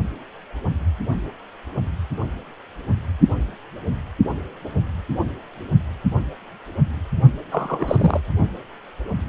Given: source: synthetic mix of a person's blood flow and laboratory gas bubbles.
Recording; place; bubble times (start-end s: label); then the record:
Doppler ultrasound of blood flow; precordium
7.52-8.21 s: bubbles
From the record:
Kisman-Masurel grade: 212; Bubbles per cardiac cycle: several, 3 to 8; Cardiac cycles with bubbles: 1 to 10%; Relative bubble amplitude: moderate (0.250 to 0.450); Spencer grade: 1 (occasional bubble signal discernible with the cardiac motion signal, with majority of cardiac periods free of bubbles); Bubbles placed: only in the low amplitude regions of the cardiac cycle